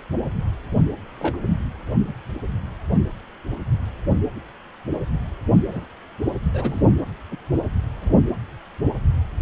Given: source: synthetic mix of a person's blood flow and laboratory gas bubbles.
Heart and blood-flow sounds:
Doppler ultrasound of blood flow; precordium
0.00-0.03 s: bubbles
1.19-1.38 s: bubbles
2.08-2.13 s: bubbles
5.71-5.85 s: bubbles
6.54-6.82 s: bubbles
7.32-7.37 s: bubbles
8.01-8.13 s: bubbles
From the record:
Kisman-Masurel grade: 121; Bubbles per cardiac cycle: 1 to 2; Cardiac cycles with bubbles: 10 to 50%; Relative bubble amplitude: barely perceptible (0.100 to 0.250); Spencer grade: 2 (many but less than half of the cardiac periods contain bubble signals, singularly or in groups); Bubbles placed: anywhere in the cardiac cycle

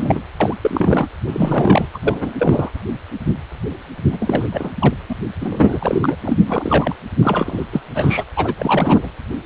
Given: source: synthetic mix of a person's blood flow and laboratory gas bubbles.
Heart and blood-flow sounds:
Doppler ultrasound of blood flow; precordium
0.00-0.23 s: bubbles
0.40-0.54 s: bubbles
0.61-1.07 s: bubbles
1.27-1.88 s: bubbles
1.94-2.33 s: bubbles
2.39-2.70 s: bubbles
4.11-4.71 s: bubbles
4.80-4.94 s: bubbles
5.09-5.15 s: bubbles
5.39-6.16 s: bubbles
6.24-6.38 s: bubbles
6.46-6.95 s: bubbles
7.21-7.66 s: bubbles
7.73-7.83 s: bubbles
7.95-8.25 s: bubbles
8.36-8.54 s: bubbles
8.58-9.09 s: bubbles
From the record:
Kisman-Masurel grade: 333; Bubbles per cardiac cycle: rolling drumbeat, 9 or more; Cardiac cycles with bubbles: 50 to 99%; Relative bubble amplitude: loud (0.450 to 0.775); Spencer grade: 3 (all of the cardiac periods contain showers or single bubble signals, but not dominating or overriding the cardiac motion signals); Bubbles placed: anywhere in the cardiac cycle

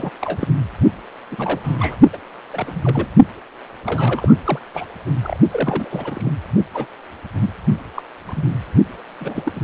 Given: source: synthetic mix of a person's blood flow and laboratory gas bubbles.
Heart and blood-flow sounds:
Doppler ultrasound of blood flow; precordium
0.00-0.11 s: bubbles
0.22-0.48 s: bubbles
1.31-1.60 s: bubbles
1.64-1.96 s: bubbles
2.13-2.17 s: bubbles
2.54-3.08 s: bubbles
3.85-4.33 s: bubbles
4.46-4.60 s: bubbles
4.74-4.86 s: bubbles
5.24-5.38 s: bubbles
5.51-6.31 s: bubbles
6.74-6.86 s: bubbles
7.41-7.50 s: bubbles
7.96-8.02 s: bubbles
8.25-8.46 s: bubbles
9.21-9.52 s: bubbles
9.55-9.60 s: bubbles
From the record:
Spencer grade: 3 (all of the cardiac periods contain showers or single bubble signals, but not dominating or overriding the cardiac motion signals); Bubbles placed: only in the low amplitude regions of the cardiac cycle

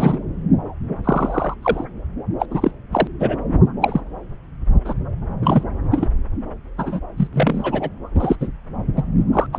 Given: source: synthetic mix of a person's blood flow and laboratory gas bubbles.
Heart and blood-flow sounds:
Doppler ultrasound of blood flow; subclavian vein
0.00-0.20 s: bubbles
1.04-1.54 s: bubbles
1.62-1.84 s: bubbles
2.40-2.46 s: bubbles
2.50-2.71 s: bubbles
2.92-3.08 s: bubbles
3.20-3.36 s: bubbles
3.81-4.02 s: bubbles
4.84-4.95 s: bubbles
5.42-5.63 s: bubbles
5.91-6.08 s: bubbles
6.78-7.00 s: bubbles
7.17-7.28 s: bubbles
7.33-7.90 s: bubbles
8.14-8.37 s: bubbles
8.39-8.47 s: bubbles
8.96-9.03 s: bubbles
9.32-9.46 s: bubbles
9.53-9.58 s: bubbles
From the record:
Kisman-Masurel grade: 243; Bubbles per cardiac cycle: several, 3 to 8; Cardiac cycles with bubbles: 100%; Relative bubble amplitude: loud (0.450 to 0.775); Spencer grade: 3 (all of the cardiac periods contain showers or single bubble signals, but not dominating or overriding the cardiac motion signals); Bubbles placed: anywhere in the cardiac cycle

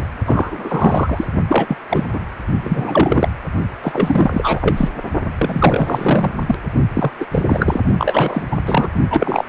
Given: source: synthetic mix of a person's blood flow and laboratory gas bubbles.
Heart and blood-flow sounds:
Doppler ultrasound of blood flow; precordium
0.00-0.04 s: bubbles
0.26-1.27 s: bubbles
1.48-1.77 s: bubbles
1.90-2.04 s: bubbles
2.12-2.20 s: bubbles
2.63-3.28 s: bubbles
3.82-4.90 s: bubbles
5.38-6.33 s: bubbles
6.46-6.55 s: bubbles
6.94-7.12 s: bubbles
7.20-7.26 s: bubbles
7.32-7.42 s: bubbles
7.49-7.81 s: bubbles
7.98-8.42 s: bubbles
8.51-8.56 s: bubbles
8.65-8.88 s: bubbles
9.10-9.45 s: bubbles
From the record:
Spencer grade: 3 (all of the cardiac periods contain showers or single bubble signals, but not dominating or overriding the cardiac motion signals); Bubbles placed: only in the low amplitude regions of the cardiac cycle

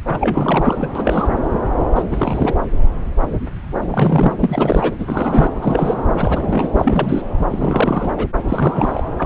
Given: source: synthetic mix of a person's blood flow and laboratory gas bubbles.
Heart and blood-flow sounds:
Doppler ultrasound of blood flow; subclavian vein
0.07-0.88 s: bubbles
0.95-1.28 s: bubbles
1.95-2.03 s: bubbles
2.10-2.54 s: bubbles
3.82-3.88 s: bubbles
3.90-4.33 s: bubbles
4.39-4.93 s: bubbles
4.99-5.52 s: bubbles
5.61-5.97 s: bubbles
6.16-6.70 s: bubbles
6.75-7.22 s: bubbles
7.49-8.12 s: bubbles
8.16-8.27 s: bubbles
8.48-9.02 s: bubbles
9.18-9.26 s: bubbles
From the record:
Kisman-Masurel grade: 332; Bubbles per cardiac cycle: rolling drumbeat, 9 or more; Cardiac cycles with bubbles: 50 to 99%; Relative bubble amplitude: moderate (0.250 to 0.450); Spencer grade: 3 (all of the cardiac periods contain showers or single bubble signals, but not dominating or overriding the cardiac motion signals); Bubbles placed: anywhere in the cardiac cycle

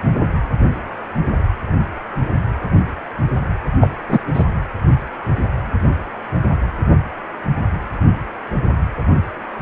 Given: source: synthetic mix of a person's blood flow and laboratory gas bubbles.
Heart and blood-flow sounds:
Doppler ultrasound of blood flow; precordium
3.80-3.90 s: bubbles
4.08-4.19 s: bubbles
4.34-4.45 s: bubbles
From the record:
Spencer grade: 1 (occasional bubble signal discernible with the cardiac motion signal, with majority of cardiac periods free of bubbles); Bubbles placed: anywhere in the cardiac cycle

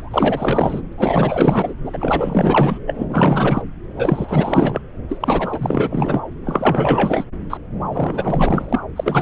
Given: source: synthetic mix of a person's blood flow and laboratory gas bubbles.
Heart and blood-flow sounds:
Doppler ultrasound of blood flow; subclavian vein
0.00-0.82 s: bubbles
0.92-0.95 s: bubbles
0.98-1.74 s: bubbles
1.84-2.79 s: bubbles
2.87-3.04 s: bubbles
3.09-3.62 s: bubbles
3.96-4.82 s: bubbles
5.09-6.21 s: bubbles
6.45-7.25 s: bubbles
7.50-7.58 s: bubbles
7.91-8.80 s: bubbles
8.96-9.22 s: bubbles
From the record:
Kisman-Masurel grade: 444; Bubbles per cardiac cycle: continuous sound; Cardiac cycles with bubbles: 100%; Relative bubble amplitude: maximal (0.775 to 0.999); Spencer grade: 4 (maximum detectable bubble signal sounding continuously throughout systole and diastole of every cardiac period, and overriding the amplitude of the normal cardiac signals); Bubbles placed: anywhere in the cardiac cycle

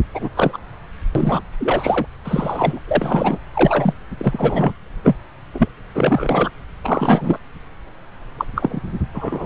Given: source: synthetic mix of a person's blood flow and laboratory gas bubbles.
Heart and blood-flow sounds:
Doppler ultrasound of blood flow; subclavian vein
0.14-0.30 s: bubbles
0.35-0.58 s: bubbles
1.15-1.42 s: bubbles
1.59-2.06 s: bubbles
2.24-2.79 s: bubbles
2.88-3.38 s: bubbles
3.53-3.94 s: bubbles
4.18-4.73 s: bubbles
5.04-5.16 s: bubbles
5.54-5.68 s: bubbles
5.95-6.50 s: bubbles
6.83-7.39 s: bubbles
8.38-8.45 s: bubbles
8.55-8.80 s: bubbles
9.14-9.46 s: bubbles
From the record:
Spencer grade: 3 (all of the cardiac periods contain showers or single bubble signals, but not dominating or overriding the cardiac motion signals); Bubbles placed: anywhere in the cardiac cycle

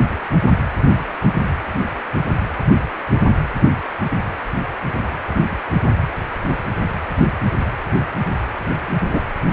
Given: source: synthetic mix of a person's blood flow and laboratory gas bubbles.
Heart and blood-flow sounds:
Doppler ultrasound of blood flow; precordium
9.09-9.21 s: bubbles
From the record:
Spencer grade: 1 (occasional bubble signal discernible with the cardiac motion signal, with majority of cardiac periods free of bubbles); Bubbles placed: anywhere in the cardiac cycle

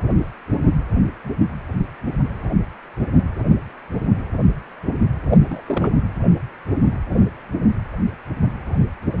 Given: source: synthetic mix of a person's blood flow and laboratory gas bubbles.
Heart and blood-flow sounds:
Doppler ultrasound of blood flow; precordium
5.29-5.38 s: bubbles
5.42-5.61 s: bubbles
5.67-5.96 s: bubbles
From the record:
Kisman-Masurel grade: 211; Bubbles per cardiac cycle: several, 3 to 8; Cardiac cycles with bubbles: 1 to 10%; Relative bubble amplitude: barely perceptible (0.100 to 0.250); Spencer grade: 1 (occasional bubble signal discernible with the cardiac motion signal, with majority of cardiac periods free of bubbles); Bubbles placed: anywhere in the cardiac cycle

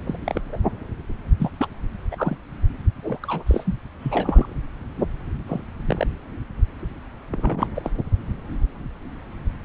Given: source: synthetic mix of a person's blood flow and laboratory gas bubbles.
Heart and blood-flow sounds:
Doppler ultrasound of blood flow; subclavian vein
0.05-0.18 s: bubbles
0.24-0.41 s: bubbles
0.52-0.58 s: bubbles
1.40-1.50 s: bubbles
1.57-1.67 s: bubbles
2.11-2.37 s: bubbles
3.02-3.19 s: bubbles
3.23-3.43 s: bubbles
3.46-3.75 s: bubbles
4.00-4.53 s: bubbles
4.98-5.04 s: bubbles
5.46-5.62 s: bubbles
5.87-6.07 s: bubbles
7.30-7.67 s: bubbles
7.75-7.90 s: bubbles
From the record:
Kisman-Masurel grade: 232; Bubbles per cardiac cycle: several, 3 to 8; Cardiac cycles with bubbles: 50 to 99%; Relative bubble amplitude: moderate (0.250 to 0.450); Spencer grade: 3 (all of the cardiac periods contain showers or single bubble signals, but not dominating or overriding the cardiac motion signals); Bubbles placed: anywhere in the cardiac cycle

